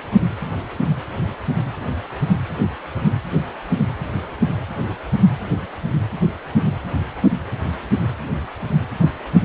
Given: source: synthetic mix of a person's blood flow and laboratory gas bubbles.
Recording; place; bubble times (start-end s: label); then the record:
Doppler ultrasound of blood flow; precordium
no bubbles
From the record:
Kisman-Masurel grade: 000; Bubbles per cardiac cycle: 0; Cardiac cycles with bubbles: 0%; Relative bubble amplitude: no bubbles discernible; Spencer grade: 0 (complete lack of bubble signals)